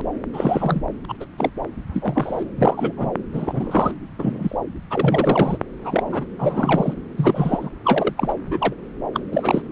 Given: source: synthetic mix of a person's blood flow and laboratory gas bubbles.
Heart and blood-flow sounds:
Doppler ultrasound of blood flow; subclavian vein
0.33-0.82 s: bubbles
1.08-1.13 s: bubbles
1.19-1.25 s: bubbles
1.38-1.50 s: bubbles
1.94-2.44 s: bubbles
2.56-2.92 s: bubbles
2.97-3.09 s: bubbles
3.33-3.93 s: bubbles
4.18-4.56 s: bubbles
4.91-5.58 s: bubbles
5.80-6.04 s: bubbles
6.06-6.25 s: bubbles
6.39-6.94 s: bubbles
7.17-7.70 s: bubbles
7.85-8.14 s: bubbles
8.17-8.34 s: bubbles
8.47-8.73 s: bubbles
9.14-9.20 s: bubbles
9.32-9.62 s: bubbles
From the record:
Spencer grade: 3 (all of the cardiac periods contain showers or single bubble signals, but not dominating or overriding the cardiac motion signals); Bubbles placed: anywhere in the cardiac cycle

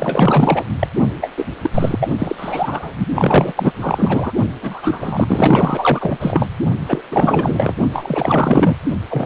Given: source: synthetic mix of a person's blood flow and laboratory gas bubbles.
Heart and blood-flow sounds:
Doppler ultrasound of blood flow; precordium
0.00-0.65 s: bubbles
0.79-0.88 s: bubbles
1.21-1.31 s: bubbles
1.36-1.46 s: bubbles
1.61-1.70 s: bubbles
1.74-2.10 s: bubbles
2.18-2.94 s: bubbles
3.15-3.73 s: bubbles
3.78-4.32 s: bubbles
4.61-6.50 s: bubbles
6.87-7.02 s: bubbles
7.12-7.75 s: bubbles
7.93-8.76 s: bubbles
9.09-9.26 s: bubbles
From the record:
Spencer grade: 4 (maximum detectable bubble signal sounding continuously throughout systole and diastole of every cardiac period, and overriding the amplitude of the normal cardiac signals); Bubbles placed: only in the low amplitude regions of the cardiac cycle

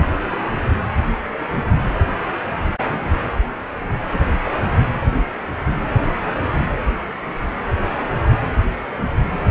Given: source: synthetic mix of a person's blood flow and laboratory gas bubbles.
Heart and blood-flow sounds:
Doppler ultrasound of blood flow; precordium
4.13-4.19 s: bubbles
4.46-4.50 s: bubbles
From the record:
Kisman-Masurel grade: 112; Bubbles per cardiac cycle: 1 to 2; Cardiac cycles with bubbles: 1 to 10%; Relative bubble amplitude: moderate (0.250 to 0.450); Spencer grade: 1 (occasional bubble signal discernible with the cardiac motion signal, with majority of cardiac periods free of bubbles); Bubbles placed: anywhere in the cardiac cycle

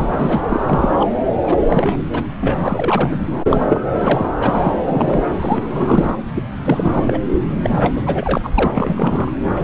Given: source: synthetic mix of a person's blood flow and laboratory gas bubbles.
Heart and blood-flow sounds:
Doppler ultrasound of blood flow; subclavian vein
0.00-0.40 s: bubbles
0.49-1.06 s: bubbles
1.44-1.57 s: bubbles
1.69-2.25 s: bubbles
2.41-3.28 s: bubbles
3.49-3.80 s: bubbles
4.02-4.26 s: bubbles
4.38-4.72 s: bubbles
4.84-5.24 s: bubbles
5.40-6.17 s: bubbles
6.34-6.43 s: bubbles
6.64-7.19 s: bubbles
7.63-8.02 s: bubbles
8.05-8.38 s: bubbles
8.43-8.51 s: bubbles
8.54-9.31 s: bubbles
9.55-9.64 s: bubbles
From the record:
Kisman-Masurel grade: 343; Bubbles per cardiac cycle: rolling drumbeat, 9 or more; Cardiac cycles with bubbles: 100%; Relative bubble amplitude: loud (0.450 to 0.775); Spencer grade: 3 (all of the cardiac periods contain showers or single bubble signals, but not dominating or overriding the cardiac motion signals); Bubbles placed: anywhere in the cardiac cycle

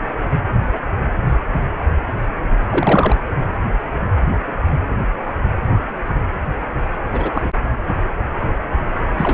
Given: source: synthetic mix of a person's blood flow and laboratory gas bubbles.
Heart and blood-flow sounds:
Doppler ultrasound of blood flow; precordium
2.69-3.16 s: bubbles
7.12-7.31 s: bubbles
7.34-7.50 s: bubbles
9.17-9.34 s: bubbles
From the record:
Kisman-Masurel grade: 223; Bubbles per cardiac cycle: several, 3 to 8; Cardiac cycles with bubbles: 10 to 50%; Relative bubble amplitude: loud (0.450 to 0.775); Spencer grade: 2 (many but less than half of the cardiac periods contain bubble signals, singularly or in groups); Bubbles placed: anywhere in the cardiac cycle

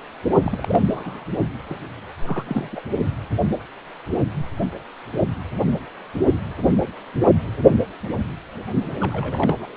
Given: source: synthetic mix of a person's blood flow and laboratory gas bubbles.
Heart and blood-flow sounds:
Doppler ultrasound of blood flow; precordium
0.45-0.83 s: bubbles
0.88-1.25 s: bubbles
1.66-1.77 s: bubbles
2.25-2.81 s: bubbles
8.99-9.55 s: bubbles
9.60-9.75 s: bubbles
From the record:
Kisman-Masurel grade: 221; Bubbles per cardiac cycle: several, 3 to 8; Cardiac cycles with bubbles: 10 to 50%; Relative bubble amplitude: barely perceptible (0.100 to 0.250); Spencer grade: 2 (many but less than half of the cardiac periods contain bubble signals, singularly or in groups); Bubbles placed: only in the low amplitude regions of the cardiac cycle

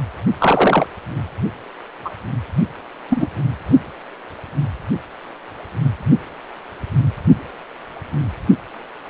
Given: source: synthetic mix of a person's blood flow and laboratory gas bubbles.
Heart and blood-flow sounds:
Doppler ultrasound of blood flow; precordium
0.39-0.86 s: bubbles
2.04-2.10 s: bubbles
3.10-3.27 s: bubbles
From the record:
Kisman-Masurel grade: 123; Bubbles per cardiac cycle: 1 to 2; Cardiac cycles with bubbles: 10 to 50%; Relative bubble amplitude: loud (0.450 to 0.775); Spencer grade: 2 (many but less than half of the cardiac periods contain bubble signals, singularly or in groups); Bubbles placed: only in the low amplitude regions of the cardiac cycle

